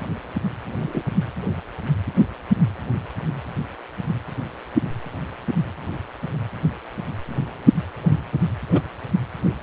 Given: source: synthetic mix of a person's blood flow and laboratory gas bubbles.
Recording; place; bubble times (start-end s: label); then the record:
Doppler ultrasound of blood flow; precordium
0.80-1.02 s: bubbles
8.71-8.81 s: bubbles
From the record:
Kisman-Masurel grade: 121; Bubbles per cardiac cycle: 1 to 2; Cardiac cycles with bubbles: 10 to 50%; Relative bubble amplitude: barely perceptible (0.100 to 0.250); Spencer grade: 2 (many but less than half of the cardiac periods contain bubble signals, singularly or in groups); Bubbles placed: only in the low amplitude regions of the cardiac cycle